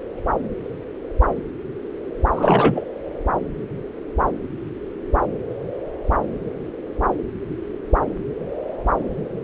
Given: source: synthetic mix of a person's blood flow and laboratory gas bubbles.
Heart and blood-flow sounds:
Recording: Doppler ultrasound of blood flow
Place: subclavian vein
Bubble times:
2.34-2.84 s: bubbles
From the record:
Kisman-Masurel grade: 213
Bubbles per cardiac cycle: several, 3 to 8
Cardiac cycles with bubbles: 1 to 10%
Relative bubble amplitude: loud (0.450 to 0.775)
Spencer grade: 1 (occasional bubble signal discernible with the cardiac motion signal, with majority of cardiac periods free of bubbles)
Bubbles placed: anywhere in the cardiac cycle

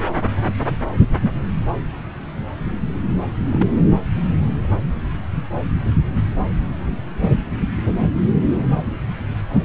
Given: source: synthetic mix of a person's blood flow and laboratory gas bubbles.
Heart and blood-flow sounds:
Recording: Doppler ultrasound of blood flow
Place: subclavian vein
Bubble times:
3.50-3.67 s: bubbles
From the record:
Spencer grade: 2 (many but less than half of the cardiac periods contain bubble signals, singularly or in groups)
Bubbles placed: anywhere in the cardiac cycle

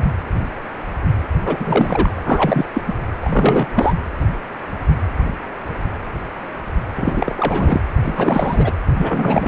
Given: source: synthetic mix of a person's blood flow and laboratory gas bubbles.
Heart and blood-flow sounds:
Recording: Doppler ultrasound of blood flow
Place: precordium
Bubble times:
0.00-0.05 s: bubbles
1.45-2.19 s: bubbles
2.26-2.66 s: bubbles
2.74-2.82 s: bubbles
2.87-2.93 s: bubbles
3.20-3.67 s: bubbles
3.75-3.94 s: bubbles
6.95-7.81 s: bubbles
8.04-8.72 s: bubbles
8.96-9.48 s: bubbles
From the record:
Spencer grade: 3 (all of the cardiac periods contain showers or single bubble signals, but not dominating or overriding the cardiac motion signals)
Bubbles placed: anywhere in the cardiac cycle

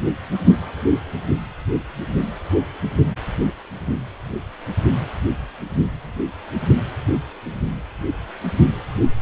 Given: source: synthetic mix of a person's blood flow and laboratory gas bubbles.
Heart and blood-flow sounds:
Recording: Doppler ultrasound of blood flow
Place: precordium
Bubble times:
no bubbles
From the record:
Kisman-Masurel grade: 000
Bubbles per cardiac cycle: 0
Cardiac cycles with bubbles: 0%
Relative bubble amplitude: no bubbles discernible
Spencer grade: 0 (complete lack of bubble signals)

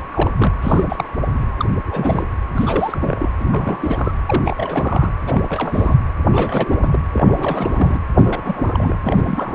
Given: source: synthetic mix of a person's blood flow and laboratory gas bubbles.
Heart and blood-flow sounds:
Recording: Doppler ultrasound of blood flow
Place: precordium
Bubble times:
0.00-0.02 s: bubbles
0.11-0.31 s: bubbles
0.38-0.53 s: bubbles
0.62-1.09 s: bubbles
1.33-1.44 s: bubbles
1.60-1.65 s: bubbles
1.82-2.28 s: bubbles
2.55-3.29 s: bubbles
3.40-3.45 s: bubbles
3.52-4.12 s: bubbles
4.26-5.12 s: bubbles
5.26-5.96 s: bubbles
6.29-7.00 s: bubbles
7.12-8.04 s: bubbles
8.16-9.00 s: bubbles
9.04-9.55 s: bubbles
From the record:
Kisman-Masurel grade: 342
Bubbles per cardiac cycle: rolling drumbeat, 9 or more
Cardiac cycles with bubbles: 100%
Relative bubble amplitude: moderate (0.250 to 0.450)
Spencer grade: 3 (all of the cardiac periods contain showers or single bubble signals, but not dominating or overriding the cardiac motion signals)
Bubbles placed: anywhere in the cardiac cycle

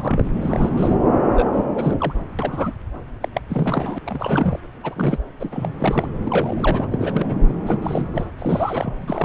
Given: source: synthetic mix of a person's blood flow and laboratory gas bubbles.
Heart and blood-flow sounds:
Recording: Doppler ultrasound of blood flow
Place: subclavian vein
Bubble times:
0.00-0.29 s: bubbles
0.41-0.96 s: bubbles
1.31-1.65 s: bubbles
1.74-1.94 s: bubbles
1.99-2.13 s: bubbles
2.38-2.72 s: bubbles
3.20-3.28 s: bubbles
3.34-3.40 s: bubbles
3.49-3.98 s: bubbles
4.06-4.59 s: bubbles
4.83-5.18 s: bubbles
5.40-5.49 s: bubbles
5.52-6.07 s: bubbles
6.24-6.88 s: bubbles
6.92-7.37 s: bubbles
7.42-7.53 s: bubbles
7.66-7.79 s: bubbles
7.82-8.06 s: bubbles
8.12-8.25 s: bubbles
8.38-8.97 s: bubbles
9.00-9.24 s: bubbles
From the record:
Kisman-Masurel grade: 342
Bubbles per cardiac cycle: rolling drumbeat, 9 or more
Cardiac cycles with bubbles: 100%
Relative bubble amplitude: moderate (0.250 to 0.450)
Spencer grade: 3 (all of the cardiac periods contain showers or single bubble signals, but not dominating or overriding the cardiac motion signals)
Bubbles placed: anywhere in the cardiac cycle

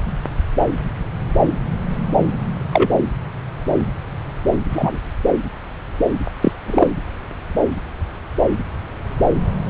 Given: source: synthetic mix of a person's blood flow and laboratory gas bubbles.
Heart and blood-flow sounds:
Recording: Doppler ultrasound of blood flow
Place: subclavian vein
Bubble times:
2.73-2.90 s: bubbles
4.69-5.00 s: bubbles
6.41-6.51 s: bubbles
6.66-6.88 s: bubbles
From the record:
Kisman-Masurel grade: 123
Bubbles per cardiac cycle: 1 to 2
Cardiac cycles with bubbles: 10 to 50%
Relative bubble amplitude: loud (0.450 to 0.775)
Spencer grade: 2 (many but less than half of the cardiac periods contain bubble signals, singularly or in groups)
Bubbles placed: anywhere in the cardiac cycle

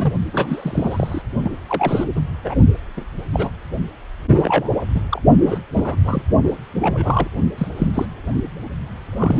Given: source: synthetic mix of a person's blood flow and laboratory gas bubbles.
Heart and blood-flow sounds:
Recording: Doppler ultrasound of blood flow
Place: precordium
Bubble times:
0.00-0.14 s: bubbles
0.32-1.21 s: bubbles
1.43-1.50 s: bubbles
1.69-2.04 s: bubbles
2.16-2.21 s: bubbles
2.44-2.55 s: bubbles
2.97-3.05 s: bubbles
3.33-3.50 s: bubbles
4.28-4.71 s: bubbles
4.95-5.01 s: bubbles
5.09-5.21 s: bubbles
5.45-5.58 s: bubbles
5.73-5.96 s: bubbles
6.04-6.23 s: bubbles
6.43-6.53 s: bubbles
6.81-7.27 s: bubbles
7.58-7.67 s: bubbles
7.77-7.88 s: bubbles
7.93-8.05 s: bubbles
9.12-9.40 s: bubbles
From the record:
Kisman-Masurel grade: 242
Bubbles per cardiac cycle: several, 3 to 8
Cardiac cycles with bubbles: 100%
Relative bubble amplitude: moderate (0.250 to 0.450)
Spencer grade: 3 (all of the cardiac periods contain showers or single bubble signals, but not dominating or overriding the cardiac motion signals)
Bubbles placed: only in the low amplitude regions of the cardiac cycle

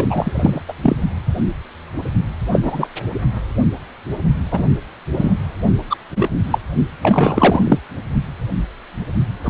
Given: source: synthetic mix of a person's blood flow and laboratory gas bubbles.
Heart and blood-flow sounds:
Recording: Doppler ultrasound of blood flow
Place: precordium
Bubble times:
0.00-0.62 s: bubbles
0.68-0.73 s: bubbles
0.81-0.96 s: bubbles
2.52-2.88 s: bubbles
4.51-4.62 s: bubbles
5.14-5.34 s: bubbles
5.90-5.97 s: bubbles
6.16-6.30 s: bubbles
6.50-6.58 s: bubbles
7.01-7.79 s: bubbles
9.44-9.50 s: bubbles
From the record:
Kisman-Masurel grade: 233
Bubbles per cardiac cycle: several, 3 to 8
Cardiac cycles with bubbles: 50 to 99%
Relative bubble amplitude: loud (0.450 to 0.775)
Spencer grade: 3 (all of the cardiac periods contain showers or single bubble signals, but not dominating or overriding the cardiac motion signals)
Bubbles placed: only in the low amplitude regions of the cardiac cycle

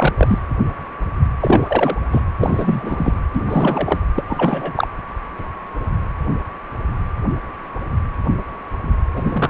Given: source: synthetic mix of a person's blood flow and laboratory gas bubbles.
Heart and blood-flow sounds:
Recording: Doppler ultrasound of blood flow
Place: precordium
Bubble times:
0.00-0.13 s: bubbles
0.17-0.39 s: bubbles
1.40-1.96 s: bubbles
2.11-2.23 s: bubbles
2.40-3.21 s: bubbles
3.35-3.43 s: bubbles
3.46-3.98 s: bubbles
4.15-4.23 s: bubbles
4.27-4.88 s: bubbles
9.16-9.50 s: bubbles
From the record:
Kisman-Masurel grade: 333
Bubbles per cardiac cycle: rolling drumbeat, 9 or more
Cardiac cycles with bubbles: 50 to 99%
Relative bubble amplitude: loud (0.450 to 0.775)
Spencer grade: 3 (all of the cardiac periods contain showers or single bubble signals, but not dominating or overriding the cardiac motion signals)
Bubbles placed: anywhere in the cardiac cycle

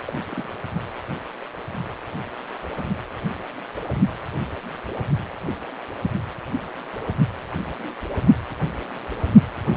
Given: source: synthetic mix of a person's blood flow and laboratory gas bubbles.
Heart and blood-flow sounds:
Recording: Doppler ultrasound of blood flow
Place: precordium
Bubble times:
0.00-0.03 s: bubbles
0.06-0.49 s: bubbles
From the record:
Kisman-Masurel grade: 211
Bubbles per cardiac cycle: several, 3 to 8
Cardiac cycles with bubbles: 1 to 10%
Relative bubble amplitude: barely perceptible (0.100 to 0.250)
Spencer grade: 1 (occasional bubble signal discernible with the cardiac motion signal, with majority of cardiac periods free of bubbles)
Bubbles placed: anywhere in the cardiac cycle

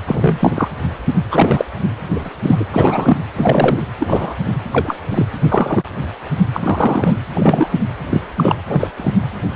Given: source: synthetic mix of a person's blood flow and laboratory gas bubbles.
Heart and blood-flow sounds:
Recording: Doppler ultrasound of blood flow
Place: precordium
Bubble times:
0.07-0.68 s: bubbles
1.31-1.65 s: bubbles
2.13-2.29 s: bubbles
2.43-2.65 s: bubbles
2.72-3.17 s: bubbles
3.38-3.82 s: bubbles
4.00-4.34 s: bubbles
4.72-4.98 s: bubbles
5.09-5.26 s: bubbles
5.48-5.83 s: bubbles
6.54-7.16 s: bubbles
7.34-7.68 s: bubbles
8.10-8.21 s: bubbles
8.36-8.56 s: bubbles
8.67-8.88 s: bubbles
8.97-9.13 s: bubbles
From the record:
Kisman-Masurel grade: 233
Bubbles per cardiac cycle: several, 3 to 8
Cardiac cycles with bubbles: 50 to 99%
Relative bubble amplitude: loud (0.450 to 0.775)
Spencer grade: 3 (all of the cardiac periods contain showers or single bubble signals, but not dominating or overriding the cardiac motion signals)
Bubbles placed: anywhere in the cardiac cycle

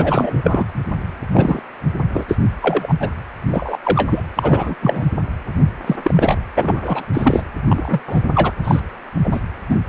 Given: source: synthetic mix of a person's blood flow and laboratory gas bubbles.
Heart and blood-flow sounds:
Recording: Doppler ultrasound of blood flow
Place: precordium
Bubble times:
0.00-0.66 s: bubbles
1.31-1.60 s: bubbles
2.14-2.23 s: bubbles
2.28-2.37 s: bubbles
2.62-2.94 s: bubbles
3.00-3.10 s: bubbles
3.51-3.78 s: bubbles
3.83-4.25 s: bubbles
4.34-4.75 s: bubbles
4.81-5.04 s: bubbles
5.86-5.96 s: bubbles
6.02-6.38 s: bubbles
6.56-7.04 s: bubbles
7.13-7.42 s: bubbles
7.68-8.01 s: bubbles
8.07-8.20 s: bubbles
8.35-8.53 s: bubbles
8.64-8.80 s: bubbles
9.24-9.41 s: bubbles
9.69-9.77 s: bubbles
From the record:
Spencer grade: 3 (all of the cardiac periods contain showers or single bubble signals, but not dominating or overriding the cardiac motion signals)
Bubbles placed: anywhere in the cardiac cycle

